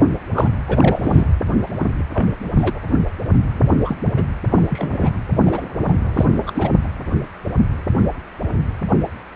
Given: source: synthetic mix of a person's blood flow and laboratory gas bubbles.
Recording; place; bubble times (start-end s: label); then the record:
Doppler ultrasound of blood flow; precordium
0.34-0.50 s: bubbles
0.68-1.27 s: bubbles
1.78-1.86 s: bubbles
2.14-2.26 s: bubbles
2.57-2.79 s: bubbles
3.84-3.97 s: bubbles
4.13-4.23 s: bubbles
4.51-4.67 s: bubbles
4.69-5.18 s: bubbles
5.46-5.66 s: bubbles
5.88-5.93 s: bubbles
6.16-6.25 s: bubbles
6.46-6.52 s: bubbles
6.55-6.70 s: bubbles
From the record:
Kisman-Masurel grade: 232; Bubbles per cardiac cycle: several, 3 to 8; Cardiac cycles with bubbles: 50 to 99%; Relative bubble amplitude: moderate (0.250 to 0.450); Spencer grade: 3 (all of the cardiac periods contain showers or single bubble signals, but not dominating or overriding the cardiac motion signals); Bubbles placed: anywhere in the cardiac cycle